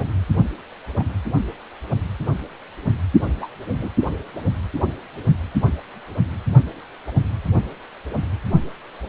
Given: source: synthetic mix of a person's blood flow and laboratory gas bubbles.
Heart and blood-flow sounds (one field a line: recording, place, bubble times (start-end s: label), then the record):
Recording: Doppler ultrasound of blood flow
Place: precordium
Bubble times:
0.00-0.06 s: bubbles
0.99-1.03 s: bubbles
3.39-3.50 s: bubbles
3.80-3.90 s: bubbles
From the record:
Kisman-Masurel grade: 121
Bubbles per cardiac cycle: 1 to 2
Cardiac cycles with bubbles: 10 to 50%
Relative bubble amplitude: barely perceptible (0.100 to 0.250)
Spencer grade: 2 (many but less than half of the cardiac periods contain bubble signals, singularly or in groups)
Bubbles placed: only in the low amplitude regions of the cardiac cycle